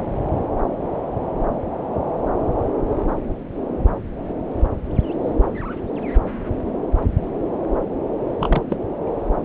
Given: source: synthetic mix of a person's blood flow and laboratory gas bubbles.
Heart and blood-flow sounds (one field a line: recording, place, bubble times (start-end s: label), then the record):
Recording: Doppler ultrasound of blood flow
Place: subclavian vein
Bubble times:
8.39-8.62 s: bubbles
8.69-8.77 s: bubbles
From the record:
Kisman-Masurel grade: 212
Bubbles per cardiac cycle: several, 3 to 8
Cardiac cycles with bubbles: 1 to 10%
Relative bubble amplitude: moderate (0.250 to 0.450)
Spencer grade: 1 (occasional bubble signal discernible with the cardiac motion signal, with majority of cardiac periods free of bubbles)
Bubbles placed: anywhere in the cardiac cycle